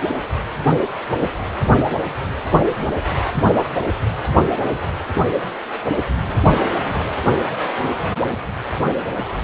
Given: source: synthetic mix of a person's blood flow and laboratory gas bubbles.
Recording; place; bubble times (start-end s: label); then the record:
Doppler ultrasound of blood flow; precordium
1.20-1.29 s: bubbles
From the record:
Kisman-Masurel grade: 113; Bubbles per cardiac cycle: 1 to 2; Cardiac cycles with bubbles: 1 to 10%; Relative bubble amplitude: loud (0.450 to 0.775); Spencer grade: 1 (occasional bubble signal discernible with the cardiac motion signal, with majority of cardiac periods free of bubbles); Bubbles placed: anywhere in the cardiac cycle